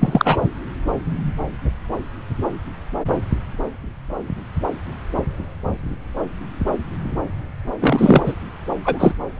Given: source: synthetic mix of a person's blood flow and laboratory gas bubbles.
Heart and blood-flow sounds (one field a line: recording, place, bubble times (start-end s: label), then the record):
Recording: Doppler ultrasound of blood flow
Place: subclavian vein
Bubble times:
0.00-0.37 s: bubbles
7.80-8.33 s: bubbles
8.85-9.12 s: bubbles
From the record:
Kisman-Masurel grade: 223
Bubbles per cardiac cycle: several, 3 to 8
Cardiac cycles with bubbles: 10 to 50%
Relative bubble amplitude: loud (0.450 to 0.775)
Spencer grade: 2 (many but less than half of the cardiac periods contain bubble signals, singularly or in groups)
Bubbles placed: anywhere in the cardiac cycle